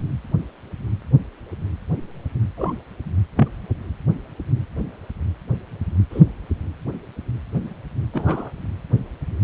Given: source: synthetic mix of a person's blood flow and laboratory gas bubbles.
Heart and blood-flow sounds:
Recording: Doppler ultrasound of blood flow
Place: precordium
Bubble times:
2.57-2.73 s: bubbles
3.36-3.49 s: bubbles
6.10-6.21 s: bubbles
8.13-8.50 s: bubbles
From the record:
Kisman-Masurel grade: 122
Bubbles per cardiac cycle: 1 to 2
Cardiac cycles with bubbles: 10 to 50%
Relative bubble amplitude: moderate (0.250 to 0.450)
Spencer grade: 2 (many but less than half of the cardiac periods contain bubble signals, singularly or in groups)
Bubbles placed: anywhere in the cardiac cycle

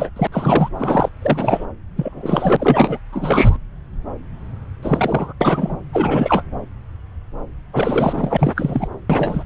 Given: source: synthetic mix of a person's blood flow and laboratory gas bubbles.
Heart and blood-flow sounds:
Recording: Doppler ultrasound of blood flow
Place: subclavian vein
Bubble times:
0.00-0.09 s: bubbles
0.16-0.27 s: bubbles
0.32-0.69 s: bubbles
0.78-1.09 s: bubbles
1.22-1.65 s: bubbles
1.96-2.98 s: bubbles
3.12-3.57 s: bubbles
4.83-5.33 s: bubbles
5.41-5.78 s: bubbles
5.92-6.42 s: bubbles
7.73-8.88 s: bubbles
9.10-9.43 s: bubbles
From the record:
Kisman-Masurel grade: 332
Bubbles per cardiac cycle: rolling drumbeat, 9 or more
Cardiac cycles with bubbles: 50 to 99%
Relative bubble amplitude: moderate (0.250 to 0.450)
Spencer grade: 3 (all of the cardiac periods contain showers or single bubble signals, but not dominating or overriding the cardiac motion signals)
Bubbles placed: anywhere in the cardiac cycle

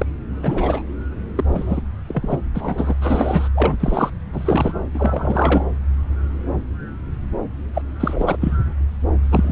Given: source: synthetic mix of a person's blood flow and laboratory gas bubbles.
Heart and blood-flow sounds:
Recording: Doppler ultrasound of blood flow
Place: subclavian vein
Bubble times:
0.00-0.06 s: bubbles
0.42-0.82 s: bubbles
1.35-1.44 s: bubbles
1.48-1.81 s: bubbles
2.08-2.39 s: bubbles
2.54-2.94 s: bubbles
3.01-3.48 s: bubbles
3.55-3.75 s: bubbles
3.80-4.10 s: bubbles
4.32-4.72 s: bubbles
4.94-5.65 s: bubbles
7.73-7.82 s: bubbles
8.00-8.37 s: bubbles
8.41-8.57 s: bubbles
9.24-9.52 s: bubbles
From the record:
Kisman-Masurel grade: 333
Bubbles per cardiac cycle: rolling drumbeat, 9 or more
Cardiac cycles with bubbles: 50 to 99%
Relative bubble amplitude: loud (0.450 to 0.775)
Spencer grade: 3 (all of the cardiac periods contain showers or single bubble signals, but not dominating or overriding the cardiac motion signals)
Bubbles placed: anywhere in the cardiac cycle

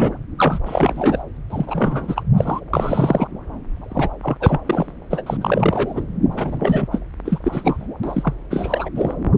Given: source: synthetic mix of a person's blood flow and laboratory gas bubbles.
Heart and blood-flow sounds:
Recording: Doppler ultrasound of blood flow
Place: subclavian vein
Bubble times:
0.00-0.14 s: bubbles
0.38-0.59 s: bubbles
0.66-1.22 s: bubbles
1.50-2.23 s: bubbles
2.36-2.60 s: bubbles
2.73-3.27 s: bubbles
3.88-4.08 s: bubbles
4.23-4.37 s: bubbles
4.40-4.61 s: bubbles
4.66-4.93 s: bubbles
5.11-5.22 s: bubbles
5.26-5.37 s: bubbles
5.41-6.04 s: bubbles
6.31-6.88 s: bubbles
6.92-6.99 s: bubbles
7.25-7.39 s: bubbles
7.44-7.88 s: bubbles
8.03-8.33 s: bubbles
8.50-8.89 s: bubbles
8.96-9.13 s: bubbles
From the record:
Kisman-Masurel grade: 342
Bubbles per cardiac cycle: rolling drumbeat, 9 or more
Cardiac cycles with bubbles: 100%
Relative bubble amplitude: moderate (0.250 to 0.450)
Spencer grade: 3 (all of the cardiac periods contain showers or single bubble signals, but not dominating or overriding the cardiac motion signals)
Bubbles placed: anywhere in the cardiac cycle

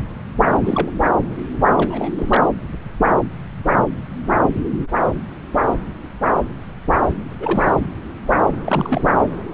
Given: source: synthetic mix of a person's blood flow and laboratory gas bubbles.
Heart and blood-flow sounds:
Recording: Doppler ultrasound of blood flow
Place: subclavian vein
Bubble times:
0.65-0.91 s: bubbles
1.77-2.11 s: bubbles
2.17-2.41 s: bubbles
7.40-7.72 s: bubbles
8.66-9.07 s: bubbles
From the record:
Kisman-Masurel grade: 222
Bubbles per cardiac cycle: several, 3 to 8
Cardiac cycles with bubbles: 10 to 50%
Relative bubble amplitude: moderate (0.250 to 0.450)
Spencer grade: 2 (many but less than half of the cardiac periods contain bubble signals, singularly or in groups)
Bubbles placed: anywhere in the cardiac cycle

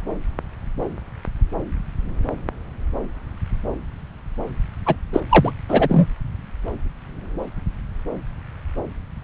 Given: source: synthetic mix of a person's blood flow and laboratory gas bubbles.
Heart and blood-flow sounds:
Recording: Doppler ultrasound of blood flow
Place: subclavian vein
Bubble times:
4.86-4.96 s: bubbles
5.12-5.21 s: bubbles
5.29-5.52 s: bubbles
5.68-6.06 s: bubbles
From the record:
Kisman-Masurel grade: 213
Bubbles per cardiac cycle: several, 3 to 8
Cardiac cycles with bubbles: 1 to 10%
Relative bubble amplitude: loud (0.450 to 0.775)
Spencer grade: 1 (occasional bubble signal discernible with the cardiac motion signal, with majority of cardiac periods free of bubbles)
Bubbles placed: anywhere in the cardiac cycle

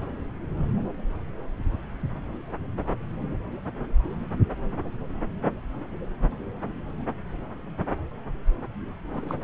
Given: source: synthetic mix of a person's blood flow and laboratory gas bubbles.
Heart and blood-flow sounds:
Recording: Doppler ultrasound of blood flow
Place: subclavian vein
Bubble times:
9.13-9.39 s: bubbles
From the record:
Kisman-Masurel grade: 111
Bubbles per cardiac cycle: 1 to 2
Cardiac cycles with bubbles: 1 to 10%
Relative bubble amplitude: barely perceptible (0.100 to 0.250)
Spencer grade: 1 (occasional bubble signal discernible with the cardiac motion signal, with majority of cardiac periods free of bubbles)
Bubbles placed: anywhere in the cardiac cycle

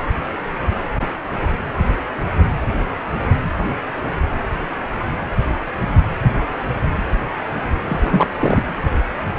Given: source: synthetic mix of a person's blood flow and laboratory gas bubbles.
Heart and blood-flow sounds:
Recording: Doppler ultrasound of blood flow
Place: precordium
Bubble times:
7.88-8.28 s: bubbles
8.39-8.62 s: bubbles
From the record:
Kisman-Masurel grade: 213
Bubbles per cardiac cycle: several, 3 to 8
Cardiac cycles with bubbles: 1 to 10%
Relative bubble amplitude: loud (0.450 to 0.775)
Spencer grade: 1 (occasional bubble signal discernible with the cardiac motion signal, with majority of cardiac periods free of bubbles)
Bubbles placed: anywhere in the cardiac cycle

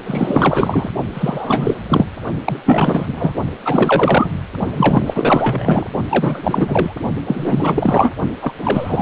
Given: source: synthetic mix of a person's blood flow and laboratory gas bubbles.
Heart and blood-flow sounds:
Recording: Doppler ultrasound of blood flow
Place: precordium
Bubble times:
0.06-0.91 s: bubbles
1.14-1.74 s: bubbles
1.89-2.06 s: bubbles
2.45-2.60 s: bubbles
2.65-3.33 s: bubbles
3.64-4.35 s: bubbles
4.76-5.02 s: bubbles
5.06-5.87 s: bubbles
6.09-6.94 s: bubbles
7.26-8.11 s: bubbles
8.41-8.52 s: bubbles
8.64-9.02 s: bubbles
From the record:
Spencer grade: 4 (maximum detectable bubble signal sounding continuously throughout systole and diastole of every cardiac period, and overriding the amplitude of the normal cardiac signals)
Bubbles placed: only in the low amplitude regions of the cardiac cycle

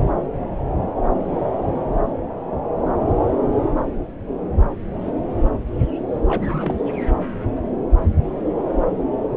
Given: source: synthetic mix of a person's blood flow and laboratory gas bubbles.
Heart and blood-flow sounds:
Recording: Doppler ultrasound of blood flow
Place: subclavian vein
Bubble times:
6.21-6.79 s: bubbles
From the record:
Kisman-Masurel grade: 211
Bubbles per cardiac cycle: several, 3 to 8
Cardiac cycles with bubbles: 1 to 10%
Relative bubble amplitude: barely perceptible (0.100 to 0.250)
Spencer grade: 1 (occasional bubble signal discernible with the cardiac motion signal, with majority of cardiac periods free of bubbles)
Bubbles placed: anywhere in the cardiac cycle

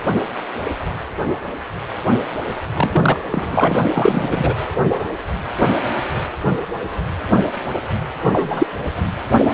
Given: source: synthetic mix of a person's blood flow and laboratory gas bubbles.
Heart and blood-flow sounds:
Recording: Doppler ultrasound of blood flow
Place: precordium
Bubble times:
2.74-3.19 s: bubbles
3.30-3.76 s: bubbles
3.92-4.54 s: bubbles
8.32-8.67 s: bubbles
From the record:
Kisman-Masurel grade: 223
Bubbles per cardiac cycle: several, 3 to 8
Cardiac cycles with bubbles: 10 to 50%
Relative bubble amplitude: loud (0.450 to 0.775)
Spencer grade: 2 (many but less than half of the cardiac periods contain bubble signals, singularly or in groups)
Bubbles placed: anywhere in the cardiac cycle

